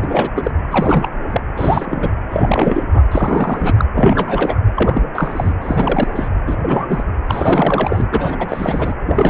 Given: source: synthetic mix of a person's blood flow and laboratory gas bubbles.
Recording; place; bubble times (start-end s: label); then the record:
Doppler ultrasound of blood flow; precordium
0.00-0.30 s: bubbles
0.35-0.51 s: bubbles
0.70-1.10 s: bubbles
1.30-1.41 s: bubbles
1.56-2.10 s: bubbles
2.30-2.83 s: bubbles
2.93-3.02 s: bubbles
3.11-3.85 s: bubbles
3.94-4.60 s: bubbles
4.76-5.02 s: bubbles
5.14-5.54 s: bubbles
5.62-6.28 s: bubbles
6.46-6.56 s: bubbles
6.61-7.04 s: bubbles
7.26-8.07 s: bubbles
8.11-8.94 s: bubbles
9.05-9.30 s: bubbles
From the record:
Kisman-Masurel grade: 343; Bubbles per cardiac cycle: rolling drumbeat, 9 or more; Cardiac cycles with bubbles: 100%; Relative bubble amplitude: loud (0.450 to 0.775); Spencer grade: 3 (all of the cardiac periods contain showers or single bubble signals, but not dominating or overriding the cardiac motion signals); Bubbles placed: anywhere in the cardiac cycle